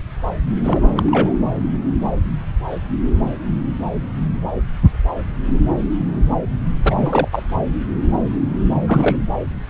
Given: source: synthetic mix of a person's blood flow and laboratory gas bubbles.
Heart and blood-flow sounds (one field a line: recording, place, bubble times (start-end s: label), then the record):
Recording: Doppler ultrasound of blood flow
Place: subclavian vein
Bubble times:
0.63-1.34 s: bubbles
6.83-7.28 s: bubbles
7.32-7.43 s: bubbles
8.79-9.17 s: bubbles
From the record:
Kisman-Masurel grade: 222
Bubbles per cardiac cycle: several, 3 to 8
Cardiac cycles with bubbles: 10 to 50%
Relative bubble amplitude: moderate (0.250 to 0.450)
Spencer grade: 2 (many but less than half of the cardiac periods contain bubble signals, singularly or in groups)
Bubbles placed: anywhere in the cardiac cycle